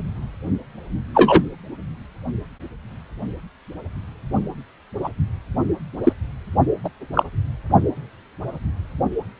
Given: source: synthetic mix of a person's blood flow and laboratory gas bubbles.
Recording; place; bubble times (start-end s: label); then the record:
Doppler ultrasound of blood flow; precordium
1.14-1.43 s: bubbles
5.04-5.10 s: bubbles
6.04-6.12 s: bubbles
6.84-6.89 s: bubbles
7.13-7.23 s: bubbles
From the record:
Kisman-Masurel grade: 123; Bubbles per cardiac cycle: 1 to 2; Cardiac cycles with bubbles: 10 to 50%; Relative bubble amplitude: loud (0.450 to 0.775); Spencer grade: 2 (many but less than half of the cardiac periods contain bubble signals, singularly or in groups); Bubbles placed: only in the low amplitude regions of the cardiac cycle